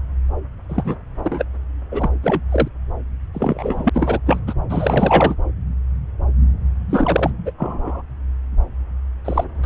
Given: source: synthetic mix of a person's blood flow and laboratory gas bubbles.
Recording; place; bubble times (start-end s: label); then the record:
Doppler ultrasound of blood flow; subclavian vein
0.69-0.96 s: bubbles
1.24-1.45 s: bubbles
1.91-2.10 s: bubbles
2.23-2.41 s: bubbles
2.51-2.68 s: bubbles
3.33-3.90 s: bubbles
3.94-4.19 s: bubbles
4.25-4.40 s: bubbles
4.47-4.54 s: bubbles
4.70-5.35 s: bubbles
6.90-7.32 s: bubbles
7.45-7.51 s: bubbles
7.58-8.02 s: bubbles
9.24-9.44 s: bubbles
9.62-9.66 s: bubbles
From the record:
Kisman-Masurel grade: 233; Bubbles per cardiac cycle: several, 3 to 8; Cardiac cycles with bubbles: 50 to 99%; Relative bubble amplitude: loud (0.450 to 0.775); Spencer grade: 3 (all of the cardiac periods contain showers or single bubble signals, but not dominating or overriding the cardiac motion signals); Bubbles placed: anywhere in the cardiac cycle